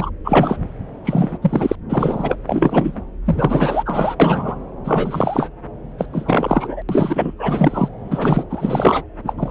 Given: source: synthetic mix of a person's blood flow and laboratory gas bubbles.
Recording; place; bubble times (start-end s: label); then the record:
Doppler ultrasound of blood flow; subclavian vein
0.00-0.10 s: bubbles
0.24-0.72 s: bubbles
1.04-1.38 s: bubbles
1.42-1.75 s: bubbles
1.89-2.37 s: bubbles
2.47-3.02 s: bubbles
3.25-4.15 s: bubbles
4.20-4.55 s: bubbles
4.84-5.50 s: bubbles
5.98-6.06 s: bubbles
6.12-6.82 s: bubbles
6.88-7.34 s: bubbles
7.38-7.88 s: bubbles
8.04-8.44 s: bubbles
8.50-9.04 s: bubbles
9.24-9.34 s: bubbles
9.38-9.51 s: bubbles
From the record:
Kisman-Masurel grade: 343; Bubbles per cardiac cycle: rolling drumbeat, 9 or more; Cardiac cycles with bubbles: 100%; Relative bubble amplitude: loud (0.450 to 0.775); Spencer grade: 3 (all of the cardiac periods contain showers or single bubble signals, but not dominating or overriding the cardiac motion signals); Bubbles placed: anywhere in the cardiac cycle